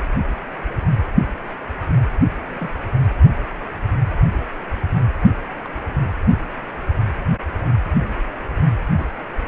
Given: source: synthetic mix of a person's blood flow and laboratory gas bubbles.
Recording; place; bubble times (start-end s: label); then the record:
Doppler ultrasound of blood flow; precordium
2.48-2.69 s: bubbles
5.65-5.68 s: bubbles
8.12-8.14 s: bubbles
8.96-9.06 s: bubbles
From the record:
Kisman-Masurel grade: 121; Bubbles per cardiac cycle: 1 to 2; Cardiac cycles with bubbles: 10 to 50%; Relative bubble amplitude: barely perceptible (0.100 to 0.250); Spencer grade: 2 (many but less than half of the cardiac periods contain bubble signals, singularly or in groups); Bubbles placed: anywhere in the cardiac cycle